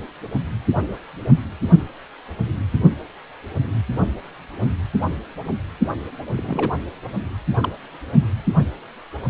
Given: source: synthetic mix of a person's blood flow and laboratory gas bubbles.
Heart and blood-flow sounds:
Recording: Doppler ultrasound of blood flow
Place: precordium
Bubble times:
6.36-6.70 s: bubbles
7.62-7.72 s: bubbles
From the record:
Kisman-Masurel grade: 121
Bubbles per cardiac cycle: 1 to 2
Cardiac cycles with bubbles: 10 to 50%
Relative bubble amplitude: barely perceptible (0.100 to 0.250)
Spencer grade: 2 (many but less than half of the cardiac periods contain bubble signals, singularly or in groups)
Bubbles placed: only in the low amplitude regions of the cardiac cycle

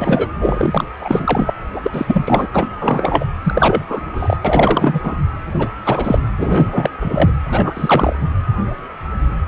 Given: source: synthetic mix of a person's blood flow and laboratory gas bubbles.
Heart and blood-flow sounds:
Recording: Doppler ultrasound of blood flow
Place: precordium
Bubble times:
0.00-0.27 s: bubbles
0.40-0.84 s: bubbles
1.01-1.52 s: bubbles
1.74-1.80 s: bubbles
1.83-2.48 s: bubbles
2.53-2.70 s: bubbles
2.79-3.25 s: bubbles
3.43-3.86 s: bubbles
3.89-4.00 s: bubbles
4.14-4.36 s: bubbles
4.45-5.01 s: bubbles
5.04-5.17 s: bubbles
5.58-5.69 s: bubbles
5.86-6.19 s: bubbles
6.38-7.31 s: bubbles
7.42-8.16 s: bubbles
From the record:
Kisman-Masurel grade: 333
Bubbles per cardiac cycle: rolling drumbeat, 9 or more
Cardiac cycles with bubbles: 50 to 99%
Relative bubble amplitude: loud (0.450 to 0.775)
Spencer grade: 3 (all of the cardiac periods contain showers or single bubble signals, but not dominating or overriding the cardiac motion signals)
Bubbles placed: anywhere in the cardiac cycle

